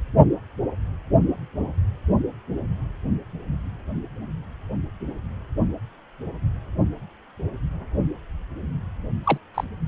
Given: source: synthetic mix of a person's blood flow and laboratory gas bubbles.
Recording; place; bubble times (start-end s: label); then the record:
Doppler ultrasound of blood flow; precordium
9.24-9.38 s: bubbles
9.54-9.64 s: bubbles
From the record:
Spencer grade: 1 (occasional bubble signal discernible with the cardiac motion signal, with majority of cardiac periods free of bubbles); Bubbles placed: only in the low amplitude regions of the cardiac cycle